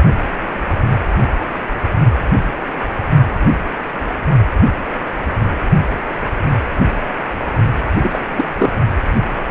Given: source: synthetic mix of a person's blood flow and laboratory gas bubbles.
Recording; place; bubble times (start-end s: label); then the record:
Doppler ultrasound of blood flow; precordium
8.02-8.21 s: bubbles
8.36-8.45 s: bubbles
8.59-8.73 s: bubbles
From the record:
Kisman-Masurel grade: 212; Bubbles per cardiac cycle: several, 3 to 8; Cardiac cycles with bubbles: 1 to 10%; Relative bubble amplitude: moderate (0.250 to 0.450); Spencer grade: 1 (occasional bubble signal discernible with the cardiac motion signal, with majority of cardiac periods free of bubbles); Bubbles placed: only in the low amplitude regions of the cardiac cycle